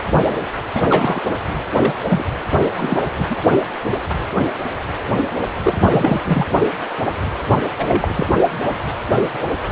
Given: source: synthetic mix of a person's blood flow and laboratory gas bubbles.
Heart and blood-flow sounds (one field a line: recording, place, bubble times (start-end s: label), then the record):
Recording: Doppler ultrasound of blood flow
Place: precordium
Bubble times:
0.74-0.81 s: bubbles
0.89-1.21 s: bubbles
1.76-1.93 s: bubbles
2.09-2.24 s: bubbles
2.78-3.05 s: bubbles
3.19-3.25 s: bubbles
3.30-3.36 s: bubbles
5.63-5.90 s: bubbles
5.92-6.21 s: bubbles
6.25-6.46 s: bubbles
7.78-8.27 s: bubbles
From the record:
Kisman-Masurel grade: 233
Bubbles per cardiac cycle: several, 3 to 8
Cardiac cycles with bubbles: 50 to 99%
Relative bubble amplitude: loud (0.450 to 0.775)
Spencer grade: 3 (all of the cardiac periods contain showers or single bubble signals, but not dominating or overriding the cardiac motion signals)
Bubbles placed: only in the low amplitude regions of the cardiac cycle